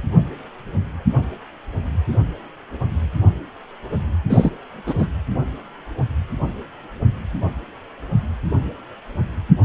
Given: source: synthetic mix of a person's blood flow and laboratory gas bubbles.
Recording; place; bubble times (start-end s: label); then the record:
Doppler ultrasound of blood flow; precordium
4.29-4.50 s: bubbles
4.86-4.94 s: bubbles
4.99-5.08 s: bubbles
From the record:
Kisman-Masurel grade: 213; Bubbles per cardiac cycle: several, 3 to 8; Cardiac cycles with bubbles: 1 to 10%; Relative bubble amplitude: loud (0.450 to 0.775); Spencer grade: 1 (occasional bubble signal discernible with the cardiac motion signal, with majority of cardiac periods free of bubbles); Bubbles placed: anywhere in the cardiac cycle